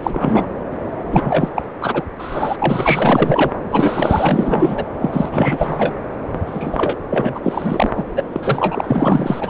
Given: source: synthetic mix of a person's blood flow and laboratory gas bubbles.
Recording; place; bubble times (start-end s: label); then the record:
Doppler ultrasound of blood flow; subclavian vein
0.03-0.47 s: bubbles
1.10-1.49 s: bubbles
1.55-1.63 s: bubbles
1.81-2.04 s: bubbles
2.18-3.51 s: bubbles
3.71-4.85 s: bubbles
4.99-5.29 s: bubbles
5.32-5.94 s: bubbles
6.46-6.96 s: bubbles
7.09-7.40 s: bubbles
7.43-7.91 s: bubbles
7.96-8.04 s: bubbles
8.16-8.23 s: bubbles
8.32-9.50 s: bubbles
From the record:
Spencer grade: 4 (maximum detectable bubble signal sounding continuously throughout systole and diastole of every cardiac period, and overriding the amplitude of the normal cardiac signals); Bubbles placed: anywhere in the cardiac cycle